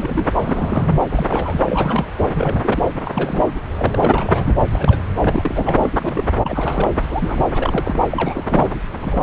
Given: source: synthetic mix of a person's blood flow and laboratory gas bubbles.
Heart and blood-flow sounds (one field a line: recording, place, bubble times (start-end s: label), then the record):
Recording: Doppler ultrasound of blood flow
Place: subclavian vein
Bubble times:
0.00-0.28 s: bubbles
0.35-0.93 s: bubbles
1.09-1.61 s: bubbles
1.65-2.06 s: bubbles
2.34-2.92 s: bubbles
3.04-3.44 s: bubbles
3.77-4.54 s: bubbles
4.75-5.01 s: bubbles
5.21-6.31 s: bubbles
6.43-6.92 s: bubbles
7.01-7.45 s: bubbles
7.54-7.99 s: bubbles
8.11-8.70 s: bubbles
8.99-9.23 s: bubbles
From the record:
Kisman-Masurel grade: 332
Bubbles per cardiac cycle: rolling drumbeat, 9 or more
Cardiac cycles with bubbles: 50 to 99%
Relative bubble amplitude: moderate (0.250 to 0.450)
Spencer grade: 3 (all of the cardiac periods contain showers or single bubble signals, but not dominating or overriding the cardiac motion signals)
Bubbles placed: anywhere in the cardiac cycle